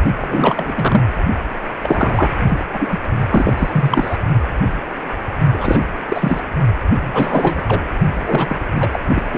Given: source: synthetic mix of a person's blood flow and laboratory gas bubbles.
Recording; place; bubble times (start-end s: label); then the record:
Doppler ultrasound of blood flow; precordium
0.20-1.03 s: bubbles
1.82-2.30 s: bubbles
2.47-2.65 s: bubbles
2.73-2.97 s: bubbles
3.29-3.53 s: bubbles
3.57-4.17 s: bubbles
5.54-5.85 s: bubbles
6.08-6.41 s: bubbles
7.00-7.80 s: bubbles
8.13-8.65 s: bubbles
8.74-8.99 s: bubbles
9.08-9.22 s: bubbles
9.32-9.38 s: bubbles
From the record:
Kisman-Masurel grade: 333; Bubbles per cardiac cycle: rolling drumbeat, 9 or more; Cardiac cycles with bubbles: 50 to 99%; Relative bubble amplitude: loud (0.450 to 0.775); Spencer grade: 3 (all of the cardiac periods contain showers or single bubble signals, but not dominating or overriding the cardiac motion signals); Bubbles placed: only in the low amplitude regions of the cardiac cycle